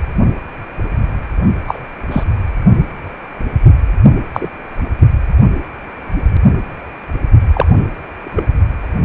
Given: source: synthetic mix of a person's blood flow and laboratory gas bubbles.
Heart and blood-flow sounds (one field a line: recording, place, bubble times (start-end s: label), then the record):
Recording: Doppler ultrasound of blood flow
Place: precordium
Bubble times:
1.67-1.81 s: bubbles
2.10-2.23 s: bubbles
4.33-4.49 s: bubbles
7.54-7.66 s: bubbles
8.24-8.47 s: bubbles
From the record:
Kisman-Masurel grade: 123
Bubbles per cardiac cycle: 1 to 2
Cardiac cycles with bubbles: 10 to 50%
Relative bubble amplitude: loud (0.450 to 0.775)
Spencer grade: 2 (many but less than half of the cardiac periods contain bubble signals, singularly or in groups)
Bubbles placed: only in the low amplitude regions of the cardiac cycle